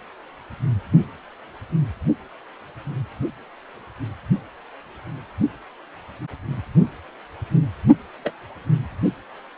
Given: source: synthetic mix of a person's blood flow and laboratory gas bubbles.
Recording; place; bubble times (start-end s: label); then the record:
Doppler ultrasound of blood flow; precordium
8.24-8.33 s: bubbles
From the record:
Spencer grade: 1 (occasional bubble signal discernible with the cardiac motion signal, with majority of cardiac periods free of bubbles); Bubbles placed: only in the low amplitude regions of the cardiac cycle